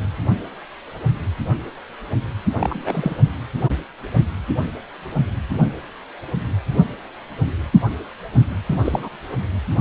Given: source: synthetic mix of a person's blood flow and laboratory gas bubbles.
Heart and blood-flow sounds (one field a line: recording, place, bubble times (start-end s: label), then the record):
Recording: Doppler ultrasound of blood flow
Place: precordium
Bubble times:
2.54-3.15 s: bubbles
8.68-9.08 s: bubbles
From the record:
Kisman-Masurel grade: 222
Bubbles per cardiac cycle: several, 3 to 8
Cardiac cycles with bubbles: 10 to 50%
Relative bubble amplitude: moderate (0.250 to 0.450)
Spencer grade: 2 (many but less than half of the cardiac periods contain bubble signals, singularly or in groups)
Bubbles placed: anywhere in the cardiac cycle